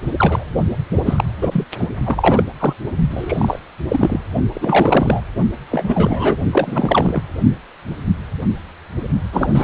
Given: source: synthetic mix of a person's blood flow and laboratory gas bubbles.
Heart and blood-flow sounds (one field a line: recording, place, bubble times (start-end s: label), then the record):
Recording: Doppler ultrasound of blood flow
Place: precordium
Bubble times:
0.18-0.44 s: bubbles
1.05-1.24 s: bubbles
1.41-1.65 s: bubbles
1.78-1.89 s: bubbles
2.04-2.43 s: bubbles
2.59-2.73 s: bubbles
3.10-3.59 s: bubbles
3.88-4.20 s: bubbles
4.54-5.21 s: bubbles
5.71-6.38 s: bubbles
6.52-7.21 s: bubbles
9.32-9.64 s: bubbles
From the record:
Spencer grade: 3 (all of the cardiac periods contain showers or single bubble signals, but not dominating or overriding the cardiac motion signals)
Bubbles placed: only in the low amplitude regions of the cardiac cycle